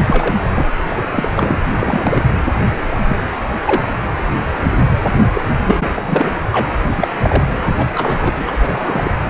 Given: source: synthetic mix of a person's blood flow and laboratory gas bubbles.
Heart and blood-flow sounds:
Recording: Doppler ultrasound of blood flow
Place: precordium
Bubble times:
0.05-0.35 s: bubbles
0.49-0.66 s: bubbles
0.78-0.83 s: bubbles
0.89-1.02 s: bubbles
1.10-1.33 s: bubbles
1.37-1.59 s: bubbles
1.79-2.23 s: bubbles
3.07-3.18 s: bubbles
3.67-3.81 s: bubbles
5.34-5.41 s: bubbles
5.66-6.33 s: bubbles
6.51-6.72 s: bubbles
6.97-7.08 s: bubbles
7.22-7.45 s: bubbles
7.65-7.75 s: bubbles
7.78-7.86 s: bubbles
7.94-8.53 s: bubbles
8.61-9.15 s: bubbles
From the record:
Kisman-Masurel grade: 232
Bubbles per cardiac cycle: several, 3 to 8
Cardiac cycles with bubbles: 50 to 99%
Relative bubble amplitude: moderate (0.250 to 0.450)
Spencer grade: 3 (all of the cardiac periods contain showers or single bubble signals, but not dominating or overriding the cardiac motion signals)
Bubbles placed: anywhere in the cardiac cycle

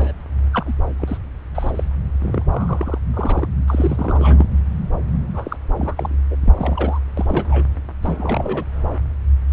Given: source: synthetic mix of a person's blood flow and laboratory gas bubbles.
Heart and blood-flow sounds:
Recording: Doppler ultrasound of blood flow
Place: subclavian vein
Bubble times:
0.00-0.12 s: bubbles
0.52-0.73 s: bubbles
0.99-1.18 s: bubbles
1.54-1.71 s: bubbles
1.74-1.83 s: bubbles
2.23-2.43 s: bubbles
2.50-2.98 s: bubbles
3.13-3.47 s: bubbles
3.67-4.46 s: bubbles
5.33-5.57 s: bubbles
5.76-6.15 s: bubbles
6.31-6.36 s: bubbles
6.45-6.53 s: bubbles
6.57-7.00 s: bubbles
7.17-7.68 s: bubbles
8.02-8.64 s: bubbles
From the record:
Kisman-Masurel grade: 242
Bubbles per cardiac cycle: several, 3 to 8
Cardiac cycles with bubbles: 100%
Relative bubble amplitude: moderate (0.250 to 0.450)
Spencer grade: 3 (all of the cardiac periods contain showers or single bubble signals, but not dominating or overriding the cardiac motion signals)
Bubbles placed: anywhere in the cardiac cycle

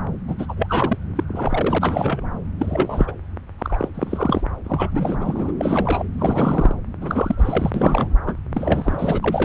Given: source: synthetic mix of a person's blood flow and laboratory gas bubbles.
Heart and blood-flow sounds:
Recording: Doppler ultrasound of blood flow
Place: subclavian vein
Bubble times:
0.27-0.34 s: bubbles
0.38-0.97 s: bubbles
1.16-1.24 s: bubbles
1.28-2.39 s: bubbles
2.59-3.12 s: bubbles
3.58-3.89 s: bubbles
3.94-4.46 s: bubbles
4.64-5.52 s: bubbles
5.58-6.10 s: bubbles
6.18-6.75 s: bubbles
7.00-7.71 s: bubbles
7.74-8.16 s: bubbles
8.26-8.35 s: bubbles
8.54-9.20 s: bubbles
9.22-9.45 s: bubbles
From the record:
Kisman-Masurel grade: 342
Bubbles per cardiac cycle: rolling drumbeat, 9 or more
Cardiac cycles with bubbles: 100%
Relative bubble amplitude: moderate (0.250 to 0.450)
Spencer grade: 3 (all of the cardiac periods contain showers or single bubble signals, but not dominating or overriding the cardiac motion signals)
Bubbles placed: anywhere in the cardiac cycle

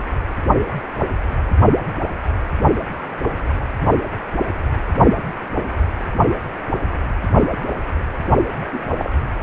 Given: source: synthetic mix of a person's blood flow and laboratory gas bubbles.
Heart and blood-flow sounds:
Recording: Doppler ultrasound of blood flow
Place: precordium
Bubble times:
8.56-8.83 s: bubbles
8.98-9.12 s: bubbles
From the record:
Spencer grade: 1 (occasional bubble signal discernible with the cardiac motion signal, with majority of cardiac periods free of bubbles)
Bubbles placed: anywhere in the cardiac cycle

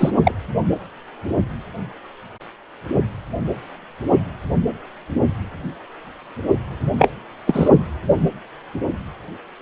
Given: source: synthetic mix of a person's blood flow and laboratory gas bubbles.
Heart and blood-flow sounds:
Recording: Doppler ultrasound of blood flow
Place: precordium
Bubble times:
0.00-0.11 s: bubbles
0.25-0.32 s: bubbles
6.98-7.09 s: bubbles
7.47-7.70 s: bubbles
From the record:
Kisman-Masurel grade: 223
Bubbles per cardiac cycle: several, 3 to 8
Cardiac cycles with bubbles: 10 to 50%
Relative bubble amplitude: loud (0.450 to 0.775)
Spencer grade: 2 (many but less than half of the cardiac periods contain bubble signals, singularly or in groups)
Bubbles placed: anywhere in the cardiac cycle

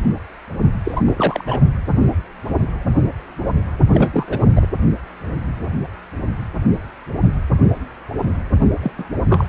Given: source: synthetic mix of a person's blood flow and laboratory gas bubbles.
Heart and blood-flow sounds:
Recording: Doppler ultrasound of blood flow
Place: precordium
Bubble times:
0.84-1.61 s: bubbles
3.90-4.48 s: bubbles
4.54-4.67 s: bubbles
8.82-8.91 s: bubbles
8.97-9.04 s: bubbles
9.29-9.47 s: bubbles
From the record:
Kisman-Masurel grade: 222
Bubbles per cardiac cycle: several, 3 to 8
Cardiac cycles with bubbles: 10 to 50%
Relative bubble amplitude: moderate (0.250 to 0.450)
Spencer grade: 2 (many but less than half of the cardiac periods contain bubble signals, singularly or in groups)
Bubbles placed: only in the low amplitude regions of the cardiac cycle

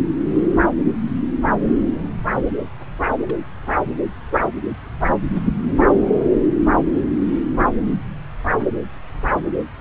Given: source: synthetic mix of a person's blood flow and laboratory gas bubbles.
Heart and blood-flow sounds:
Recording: Doppler ultrasound of blood flow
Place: subclavian vein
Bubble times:
3.18-3.36 s: bubbles
From the record:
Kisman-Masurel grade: 111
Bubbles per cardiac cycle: 1 to 2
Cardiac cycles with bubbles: 1 to 10%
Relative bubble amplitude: barely perceptible (0.100 to 0.250)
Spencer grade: 1 (occasional bubble signal discernible with the cardiac motion signal, with majority of cardiac periods free of bubbles)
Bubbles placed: anywhere in the cardiac cycle

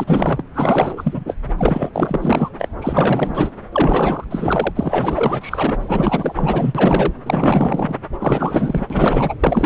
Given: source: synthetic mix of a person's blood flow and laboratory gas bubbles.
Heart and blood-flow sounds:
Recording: Doppler ultrasound of blood flow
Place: subclavian vein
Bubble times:
0.00-0.42 s: bubbles
0.54-1.35 s: bubbles
1.58-1.90 s: bubbles
1.93-2.50 s: bubbles
2.58-2.68 s: bubbles
2.81-3.51 s: bubbles
3.72-4.25 s: bubbles
4.30-5.77 s: bubbles
5.81-7.13 s: bubbles
7.25-7.95 s: bubbles
8.19-8.85 s: bubbles
8.90-9.35 s: bubbles
9.40-9.66 s: bubbles
From the record:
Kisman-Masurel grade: 444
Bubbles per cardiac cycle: continuous sound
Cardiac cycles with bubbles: 100%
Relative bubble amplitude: maximal (0.775 to 0.999)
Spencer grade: 4 (maximum detectable bubble signal sounding continuously throughout systole and diastole of every cardiac period, and overriding the amplitude of the normal cardiac signals)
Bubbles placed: anywhere in the cardiac cycle

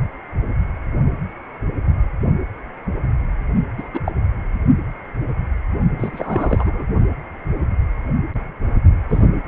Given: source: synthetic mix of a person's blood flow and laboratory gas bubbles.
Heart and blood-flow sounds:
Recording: Doppler ultrasound of blood flow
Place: precordium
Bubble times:
3.77-3.89 s: bubbles
3.94-4.00 s: bubbles
4.05-4.12 s: bubbles
5.97-6.83 s: bubbles
9.08-9.23 s: bubbles
9.46-9.48 s: bubbles
From the record:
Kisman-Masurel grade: 222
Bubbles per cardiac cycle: several, 3 to 8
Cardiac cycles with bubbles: 10 to 50%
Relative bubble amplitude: moderate (0.250 to 0.450)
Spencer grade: 2 (many but less than half of the cardiac periods contain bubble signals, singularly or in groups)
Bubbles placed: only in the low amplitude regions of the cardiac cycle

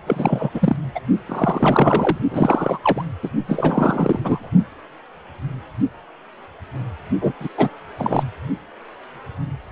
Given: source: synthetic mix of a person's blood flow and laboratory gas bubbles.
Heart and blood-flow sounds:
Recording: Doppler ultrasound of blood flow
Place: precordium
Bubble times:
0.06-0.50 s: bubbles
0.54-0.76 s: bubbles
0.94-1.00 s: bubbles
1.26-2.18 s: bubbles
2.31-2.79 s: bubbles
2.82-3.04 s: bubbles
3.23-3.29 s: bubbles
3.48-4.50 s: bubbles
7.21-7.32 s: bubbles
7.40-7.48 s: bubbles
7.57-7.69 s: bubbles
7.98-8.23 s: bubbles
From the record:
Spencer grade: 3 (all of the cardiac periods contain showers or single bubble signals, but not dominating or overriding the cardiac motion signals)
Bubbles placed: only in the low amplitude regions of the cardiac cycle

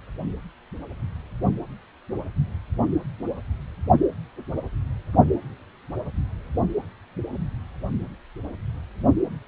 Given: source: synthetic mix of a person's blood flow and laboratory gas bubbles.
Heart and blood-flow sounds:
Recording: Doppler ultrasound of blood flow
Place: precordium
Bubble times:
no bubbles
From the record:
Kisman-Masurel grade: 000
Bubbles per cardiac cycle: 0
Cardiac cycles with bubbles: 0%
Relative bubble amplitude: no bubbles discernible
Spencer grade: 0 (complete lack of bubble signals)

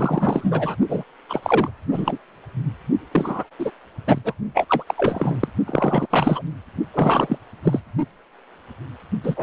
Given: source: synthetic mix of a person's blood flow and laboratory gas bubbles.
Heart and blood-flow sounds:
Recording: Doppler ultrasound of blood flow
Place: precordium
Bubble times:
0.00-0.75 s: bubbles
0.89-1.04 s: bubbles
1.29-1.40 s: bubbles
1.43-1.71 s: bubbles
1.91-2.18 s: bubbles
3.11-3.44 s: bubbles
3.58-3.71 s: bubbles
4.07-4.18 s: bubbles
4.24-4.34 s: bubbles
4.54-4.66 s: bubbles
4.68-4.84 s: bubbles
4.87-4.95 s: bubbles
4.97-5.48 s: bubbles
5.66-6.07 s: bubbles
6.10-6.42 s: bubbles
6.93-7.38 s: bubbles
7.63-7.80 s: bubbles
9.24-9.43 s: bubbles
From the record:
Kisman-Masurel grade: 333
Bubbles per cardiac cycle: rolling drumbeat, 9 or more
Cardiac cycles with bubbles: 50 to 99%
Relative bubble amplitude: loud (0.450 to 0.775)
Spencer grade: 3 (all of the cardiac periods contain showers or single bubble signals, but not dominating or overriding the cardiac motion signals)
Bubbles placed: only in the low amplitude regions of the cardiac cycle

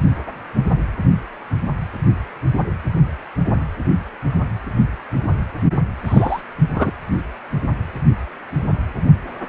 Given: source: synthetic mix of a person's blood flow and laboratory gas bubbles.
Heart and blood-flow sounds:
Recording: Doppler ultrasound of blood flow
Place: precordium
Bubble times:
6.06-6.40 s: bubbles
6.75-6.91 s: bubbles
From the record:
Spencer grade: 1 (occasional bubble signal discernible with the cardiac motion signal, with majority of cardiac periods free of bubbles)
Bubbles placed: anywhere in the cardiac cycle

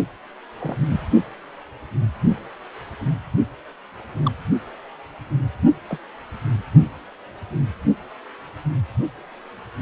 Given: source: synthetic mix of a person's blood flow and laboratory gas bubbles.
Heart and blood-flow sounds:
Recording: Doppler ultrasound of blood flow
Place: precordium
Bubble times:
0.60-0.81 s: bubbles
0.83-1.01 s: bubbles
4.25-4.31 s: bubbles
5.88-5.99 s: bubbles
From the record:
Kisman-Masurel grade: 121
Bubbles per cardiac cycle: 1 to 2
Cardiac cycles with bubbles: 10 to 50%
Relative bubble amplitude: barely perceptible (0.100 to 0.250)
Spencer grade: 2 (many but less than half of the cardiac periods contain bubble signals, singularly or in groups)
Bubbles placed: only in the low amplitude regions of the cardiac cycle

